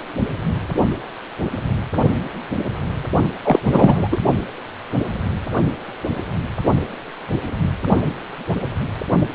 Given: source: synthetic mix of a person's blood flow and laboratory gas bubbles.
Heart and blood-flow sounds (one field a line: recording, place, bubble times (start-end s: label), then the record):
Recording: Doppler ultrasound of blood flow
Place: precordium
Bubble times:
3.44-3.60 s: bubbles
3.65-4.08 s: bubbles
4.12-4.17 s: bubbles
From the record:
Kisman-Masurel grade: 213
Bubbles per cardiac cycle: several, 3 to 8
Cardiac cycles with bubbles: 1 to 10%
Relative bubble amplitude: loud (0.450 to 0.775)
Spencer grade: 1 (occasional bubble signal discernible with the cardiac motion signal, with majority of cardiac periods free of bubbles)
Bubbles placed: only in the low amplitude regions of the cardiac cycle